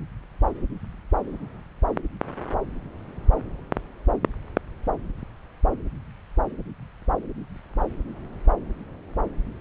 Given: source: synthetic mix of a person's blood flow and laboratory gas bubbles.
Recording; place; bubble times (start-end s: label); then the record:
Doppler ultrasound of blood flow; subclavian vein
no bubbles
From the record:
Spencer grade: 0 (complete lack of bubble signals)